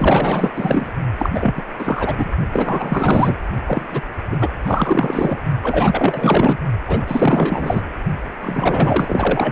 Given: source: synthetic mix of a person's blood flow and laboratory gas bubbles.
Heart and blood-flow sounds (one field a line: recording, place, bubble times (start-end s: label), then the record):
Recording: Doppler ultrasound of blood flow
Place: precordium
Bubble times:
0.00-0.50 s: bubbles
0.54-0.92 s: bubbles
1.18-1.31 s: bubbles
1.33-1.62 s: bubbles
1.78-2.15 s: bubbles
2.18-2.29 s: bubbles
2.53-3.35 s: bubbles
3.66-3.85 s: bubbles
3.91-4.01 s: bubbles
4.31-4.38 s: bubbles
4.40-4.49 s: bubbles
4.65-5.42 s: bubbles
5.62-6.58 s: bubbles
6.86-7.82 s: bubbles
8.41-9.52 s: bubbles
From the record:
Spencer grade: 4 (maximum detectable bubble signal sounding continuously throughout systole and diastole of every cardiac period, and overriding the amplitude of the normal cardiac signals)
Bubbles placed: only in the low amplitude regions of the cardiac cycle